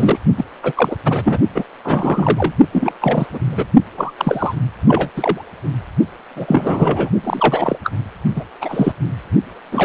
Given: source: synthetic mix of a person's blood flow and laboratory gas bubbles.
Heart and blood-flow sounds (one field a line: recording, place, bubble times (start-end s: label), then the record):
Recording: Doppler ultrasound of blood flow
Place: precordium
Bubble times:
0.00-0.19 s: bubbles
0.36-0.44 s: bubbles
0.62-0.72 s: bubbles
0.75-0.96 s: bubbles
1.05-1.38 s: bubbles
1.54-1.65 s: bubbles
1.84-2.53 s: bubbles
2.72-2.92 s: bubbles
3.00-3.27 s: bubbles
3.31-3.39 s: bubbles
3.46-3.67 s: bubbles
3.97-4.12 s: bubbles
4.17-4.55 s: bubbles
4.88-5.10 s: bubbles
5.16-5.44 s: bubbles
6.36-7.10 s: bubbles
7.23-7.79 s: bubbles
7.84-7.91 s: bubbles
8.36-8.44 s: bubbles
8.61-8.93 s: bubbles
9.71-9.85 s: bubbles
From the record:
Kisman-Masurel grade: 343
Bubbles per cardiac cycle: rolling drumbeat, 9 or more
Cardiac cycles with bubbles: 100%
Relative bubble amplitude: loud (0.450 to 0.775)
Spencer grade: 3 (all of the cardiac periods contain showers or single bubble signals, but not dominating or overriding the cardiac motion signals)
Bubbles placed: only in the low amplitude regions of the cardiac cycle